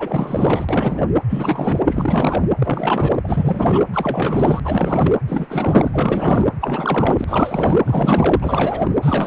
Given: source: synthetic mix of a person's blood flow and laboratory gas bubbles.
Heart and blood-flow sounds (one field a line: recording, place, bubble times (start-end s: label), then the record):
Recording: Doppler ultrasound of blood flow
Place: precordium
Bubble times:
0.00-0.65 s: bubbles
0.69-1.04 s: bubbles
1.29-2.43 s: bubbles
2.58-3.20 s: bubbles
3.23-3.85 s: bubbles
3.93-4.60 s: bubbles
4.64-5.14 s: bubbles
5.27-6.48 s: bubbles
6.61-7.25 s: bubbles
7.28-7.80 s: bubbles
7.84-8.96 s: bubbles
9.01-9.26 s: bubbles
From the record:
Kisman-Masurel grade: 444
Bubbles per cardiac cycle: continuous sound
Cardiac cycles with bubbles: 100%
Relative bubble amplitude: maximal (0.775 to 0.999)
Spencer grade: 4 (maximum detectable bubble signal sounding continuously throughout systole and diastole of every cardiac period, and overriding the amplitude of the normal cardiac signals)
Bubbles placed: anywhere in the cardiac cycle